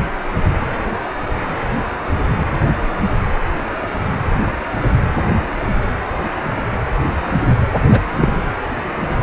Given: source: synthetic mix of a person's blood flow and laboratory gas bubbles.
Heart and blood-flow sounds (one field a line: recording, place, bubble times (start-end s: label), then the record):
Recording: Doppler ultrasound of blood flow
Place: precordium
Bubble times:
7.89-7.99 s: bubbles
8.20-8.36 s: bubbles
From the record:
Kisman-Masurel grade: 113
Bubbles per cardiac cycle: 1 to 2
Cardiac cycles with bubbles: 1 to 10%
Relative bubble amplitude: loud (0.450 to 0.775)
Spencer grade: 1 (occasional bubble signal discernible with the cardiac motion signal, with majority of cardiac periods free of bubbles)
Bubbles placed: anywhere in the cardiac cycle